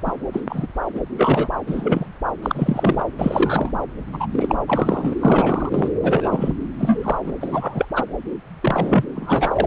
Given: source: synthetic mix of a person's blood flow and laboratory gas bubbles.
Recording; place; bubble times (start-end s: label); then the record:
Doppler ultrasound of blood flow; subclavian vein
0.05-0.11 s: bubbles
0.33-0.42 s: bubbles
0.49-0.67 s: bubbles
0.95-1.00 s: bubbles
1.18-1.48 s: bubbles
1.67-2.06 s: bubbles
2.42-3.06 s: bubbles
3.18-3.71 s: bubbles
4.12-4.26 s: bubbles
4.31-4.55 s: bubbles
4.67-5.92 s: bubbles
6.02-6.53 s: bubbles
6.79-7.17 s: bubbles
7.24-7.32 s: bubbles
7.41-7.85 s: bubbles
7.95-8.04 s: bubbles
8.62-9.04 s: bubbles
9.16-9.67 s: bubbles
From the record:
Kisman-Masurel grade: 242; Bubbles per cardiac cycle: several, 3 to 8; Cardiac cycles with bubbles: 100%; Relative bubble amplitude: moderate (0.250 to 0.450); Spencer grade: 3 (all of the cardiac periods contain showers or single bubble signals, but not dominating or overriding the cardiac motion signals); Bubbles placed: anywhere in the cardiac cycle